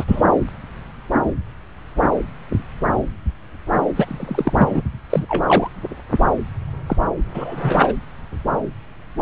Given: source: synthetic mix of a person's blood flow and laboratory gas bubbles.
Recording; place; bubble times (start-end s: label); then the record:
Doppler ultrasound of blood flow; subclavian vein
0.00-0.05 s: bubbles
0.08-0.23 s: bubbles
3.95-4.53 s: bubbles
4.57-4.81 s: bubbles
5.10-5.24 s: bubbles
5.29-5.44 s: bubbles
5.46-5.68 s: bubbles
6.87-6.96 s: bubbles
7.34-7.92 s: bubbles
From the record:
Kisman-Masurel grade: 223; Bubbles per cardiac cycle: several, 3 to 8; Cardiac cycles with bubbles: 10 to 50%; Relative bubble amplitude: loud (0.450 to 0.775); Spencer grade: 2 (many but less than half of the cardiac periods contain bubble signals, singularly or in groups); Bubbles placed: anywhere in the cardiac cycle